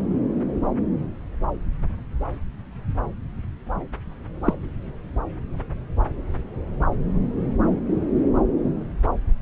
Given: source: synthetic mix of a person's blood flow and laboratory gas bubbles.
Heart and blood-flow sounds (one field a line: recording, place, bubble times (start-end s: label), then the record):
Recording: Doppler ultrasound of blood flow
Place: subclavian vein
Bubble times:
4.44-4.54 s: bubbles
From the record:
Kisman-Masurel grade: 113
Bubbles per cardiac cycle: 1 to 2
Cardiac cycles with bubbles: 1 to 10%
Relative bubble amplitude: loud (0.450 to 0.775)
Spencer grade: 1 (occasional bubble signal discernible with the cardiac motion signal, with majority of cardiac periods free of bubbles)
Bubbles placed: anywhere in the cardiac cycle